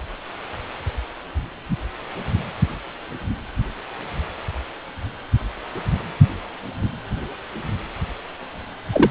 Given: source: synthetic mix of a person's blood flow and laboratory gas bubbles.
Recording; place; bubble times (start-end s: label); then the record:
Doppler ultrasound of blood flow; precordium
8.92-9.11 s: bubbles
From the record:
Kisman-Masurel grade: 113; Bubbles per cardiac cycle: 1 to 2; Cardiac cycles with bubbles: 1 to 10%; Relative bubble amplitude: loud (0.450 to 0.775); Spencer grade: 1 (occasional bubble signal discernible with the cardiac motion signal, with majority of cardiac periods free of bubbles); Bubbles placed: anywhere in the cardiac cycle